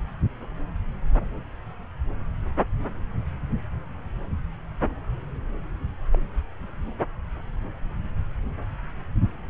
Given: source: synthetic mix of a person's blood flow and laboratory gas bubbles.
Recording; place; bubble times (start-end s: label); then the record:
Doppler ultrasound of blood flow; subclavian vein
6.12-6.19 s: bubbles
From the record:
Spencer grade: 1 (occasional bubble signal discernible with the cardiac motion signal, with majority of cardiac periods free of bubbles); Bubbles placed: anywhere in the cardiac cycle